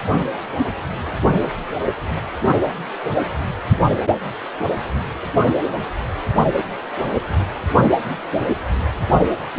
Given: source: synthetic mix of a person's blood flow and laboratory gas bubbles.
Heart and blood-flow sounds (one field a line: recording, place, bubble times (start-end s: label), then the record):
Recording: Doppler ultrasound of blood flow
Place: precordium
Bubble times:
no bubbles
From the record:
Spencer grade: 0 (complete lack of bubble signals)